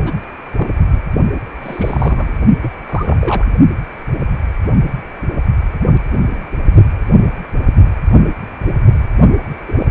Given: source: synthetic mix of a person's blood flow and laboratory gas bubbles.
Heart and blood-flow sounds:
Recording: Doppler ultrasound of blood flow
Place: precordium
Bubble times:
0.05-0.12 s: bubbles
0.56-0.69 s: bubbles
0.91-0.97 s: bubbles
1.34-1.41 s: bubbles
1.62-2.31 s: bubbles
2.62-2.69 s: bubbles
2.89-3.47 s: bubbles
9.68-9.73 s: bubbles
9.80-9.86 s: bubbles
From the record:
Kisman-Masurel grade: 232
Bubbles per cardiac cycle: several, 3 to 8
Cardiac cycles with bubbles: 50 to 99%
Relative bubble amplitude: moderate (0.250 to 0.450)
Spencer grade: 3 (all of the cardiac periods contain showers or single bubble signals, but not dominating or overriding the cardiac motion signals)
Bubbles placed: only in the low amplitude regions of the cardiac cycle

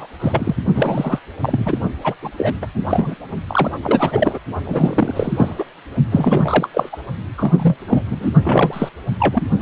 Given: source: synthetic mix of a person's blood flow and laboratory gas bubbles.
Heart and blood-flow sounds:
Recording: Doppler ultrasound of blood flow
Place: precordium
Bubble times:
0.00-0.07 s: bubbles
0.20-0.56 s: bubbles
0.74-1.19 s: bubbles
1.41-1.78 s: bubbles
2.04-2.15 s: bubbles
2.22-2.31 s: bubbles
2.38-2.54 s: bubbles
2.62-2.67 s: bubbles
2.75-2.85 s: bubbles
2.88-3.15 s: bubbles
3.47-3.71 s: bubbles
3.83-4.38 s: bubbles
4.64-5.64 s: bubbles
6.11-6.68 s: bubbles
6.74-6.89 s: bubbles
6.92-6.96 s: bubbles
7.38-7.76 s: bubbles
7.88-8.04 s: bubbles
8.10-8.30 s: bubbles
8.43-8.89 s: bubbles
9.19-9.43 s: bubbles
9.60-9.62 s: bubbles
From the record:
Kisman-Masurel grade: 342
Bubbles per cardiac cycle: rolling drumbeat, 9 or more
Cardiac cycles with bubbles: 100%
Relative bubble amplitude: moderate (0.250 to 0.450)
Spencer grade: 3 (all of the cardiac periods contain showers or single bubble signals, but not dominating or overriding the cardiac motion signals)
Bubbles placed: only in the low amplitude regions of the cardiac cycle

